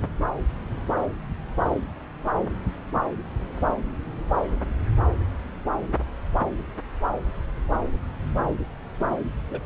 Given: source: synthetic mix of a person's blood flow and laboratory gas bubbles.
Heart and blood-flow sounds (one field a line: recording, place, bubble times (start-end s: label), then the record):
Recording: Doppler ultrasound of blood flow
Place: subclavian vein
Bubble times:
9.50-9.60 s: bubbles
From the record:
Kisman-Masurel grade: 111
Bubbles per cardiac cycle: 1 to 2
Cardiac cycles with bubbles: 1 to 10%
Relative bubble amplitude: barely perceptible (0.100 to 0.250)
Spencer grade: 1 (occasional bubble signal discernible with the cardiac motion signal, with majority of cardiac periods free of bubbles)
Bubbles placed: anywhere in the cardiac cycle